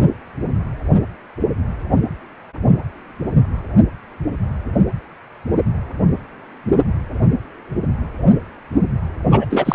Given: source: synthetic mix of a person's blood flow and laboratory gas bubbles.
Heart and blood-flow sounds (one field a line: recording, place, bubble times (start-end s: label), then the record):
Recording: Doppler ultrasound of blood flow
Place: precordium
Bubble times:
9.32-9.46 s: bubbles
9.50-9.75 s: bubbles
From the record:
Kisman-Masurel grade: 213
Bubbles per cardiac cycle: several, 3 to 8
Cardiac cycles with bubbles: 1 to 10%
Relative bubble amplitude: loud (0.450 to 0.775)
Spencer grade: 1 (occasional bubble signal discernible with the cardiac motion signal, with majority of cardiac periods free of bubbles)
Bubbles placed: anywhere in the cardiac cycle